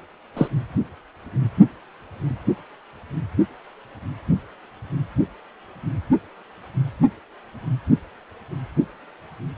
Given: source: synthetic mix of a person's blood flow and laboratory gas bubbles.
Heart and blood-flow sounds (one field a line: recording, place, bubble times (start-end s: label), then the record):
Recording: Doppler ultrasound of blood flow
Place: precordium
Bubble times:
0.37-0.48 s: bubbles
From the record:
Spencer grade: 1 (occasional bubble signal discernible with the cardiac motion signal, with majority of cardiac periods free of bubbles)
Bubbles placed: anywhere in the cardiac cycle